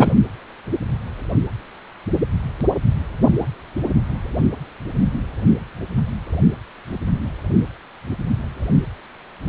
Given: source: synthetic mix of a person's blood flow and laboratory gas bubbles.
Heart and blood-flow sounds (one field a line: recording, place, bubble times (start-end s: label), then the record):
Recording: Doppler ultrasound of blood flow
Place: precordium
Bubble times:
0.00-0.12 s: bubbles
From the record:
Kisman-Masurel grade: 213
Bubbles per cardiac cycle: several, 3 to 8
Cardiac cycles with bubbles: 1 to 10%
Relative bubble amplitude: loud (0.450 to 0.775)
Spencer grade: 1 (occasional bubble signal discernible with the cardiac motion signal, with majority of cardiac periods free of bubbles)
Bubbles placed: only in the low amplitude regions of the cardiac cycle